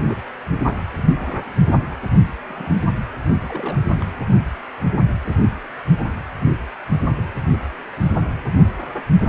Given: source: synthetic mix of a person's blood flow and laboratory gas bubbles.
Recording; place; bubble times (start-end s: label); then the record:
Doppler ultrasound of blood flow; precordium
0.06-0.18 s: bubbles
0.54-0.61 s: bubbles
0.66-0.78 s: bubbles
0.93-1.42 s: bubbles
1.62-1.77 s: bubbles
2.48-2.84 s: bubbles
3.22-3.82 s: bubbles
3.90-3.95 s: bubbles
4.02-4.06 s: bubbles
5.21-5.36 s: bubbles
5.96-6.06 s: bubbles
From the record:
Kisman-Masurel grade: 221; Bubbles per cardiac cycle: several, 3 to 8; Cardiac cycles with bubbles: 10 to 50%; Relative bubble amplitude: barely perceptible (0.100 to 0.250); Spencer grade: 2 (many but less than half of the cardiac periods contain bubble signals, singularly or in groups); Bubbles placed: anywhere in the cardiac cycle